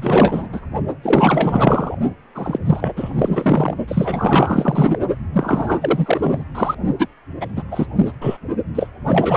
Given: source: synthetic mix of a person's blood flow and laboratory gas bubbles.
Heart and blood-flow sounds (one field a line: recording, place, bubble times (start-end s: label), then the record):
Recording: Doppler ultrasound of blood flow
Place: precordium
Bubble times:
0.00-0.48 s: bubbles
0.53-0.61 s: bubbles
1.02-1.97 s: bubbles
2.34-2.58 s: bubbles
2.65-2.94 s: bubbles
2.96-3.74 s: bubbles
3.88-4.99 s: bubbles
5.33-6.44 s: bubbles
6.54-6.75 s: bubbles
6.99-7.08 s: bubbles
7.41-7.46 s: bubbles
7.56-7.63 s: bubbles
7.71-7.86 s: bubbles
7.96-8.12 s: bubbles
8.21-8.37 s: bubbles
8.75-8.90 s: bubbles
9.08-9.37 s: bubbles
From the record:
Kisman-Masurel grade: 444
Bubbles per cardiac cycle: continuous sound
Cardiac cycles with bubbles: 100%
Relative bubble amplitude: maximal (0.775 to 0.999)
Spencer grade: 4 (maximum detectable bubble signal sounding continuously throughout systole and diastole of every cardiac period, and overriding the amplitude of the normal cardiac signals)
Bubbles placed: only in the low amplitude regions of the cardiac cycle